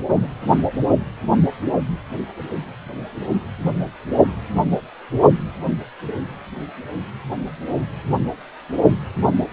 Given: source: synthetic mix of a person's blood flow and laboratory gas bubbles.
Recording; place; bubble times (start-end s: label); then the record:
Doppler ultrasound of blood flow; precordium
0.09-0.28 s: bubbles
From the record:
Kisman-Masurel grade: 211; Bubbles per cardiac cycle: several, 3 to 8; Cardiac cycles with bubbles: 1 to 10%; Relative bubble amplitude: barely perceptible (0.100 to 0.250); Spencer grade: 1 (occasional bubble signal discernible with the cardiac motion signal, with majority of cardiac periods free of bubbles); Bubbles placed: only in the low amplitude regions of the cardiac cycle